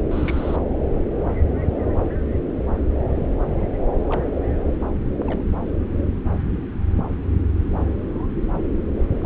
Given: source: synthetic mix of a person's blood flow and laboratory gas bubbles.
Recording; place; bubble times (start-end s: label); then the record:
Doppler ultrasound of blood flow; subclavian vein
0.11-0.56 s: bubbles
3.64-3.70 s: bubbles
4.09-4.24 s: bubbles
4.62-4.82 s: bubbles
5.19-5.23 s: bubbles
5.26-5.43 s: bubbles
From the record:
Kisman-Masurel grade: 121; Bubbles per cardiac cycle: 1 to 2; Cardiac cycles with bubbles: 10 to 50%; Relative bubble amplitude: barely perceptible (0.100 to 0.250); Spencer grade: 2 (many but less than half of the cardiac periods contain bubble signals, singularly or in groups); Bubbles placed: anywhere in the cardiac cycle